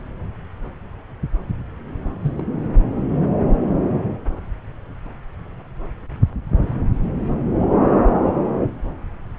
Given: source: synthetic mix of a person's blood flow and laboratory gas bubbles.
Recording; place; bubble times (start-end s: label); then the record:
Doppler ultrasound of blood flow; subclavian vein
2.21-2.32 s: bubbles
2.35-2.43 s: bubbles
From the record:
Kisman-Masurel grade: 111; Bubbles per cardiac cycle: 1 to 2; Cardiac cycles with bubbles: 1 to 10%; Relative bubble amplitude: barely perceptible (0.100 to 0.250); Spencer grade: 1 (occasional bubble signal discernible with the cardiac motion signal, with majority of cardiac periods free of bubbles); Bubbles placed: anywhere in the cardiac cycle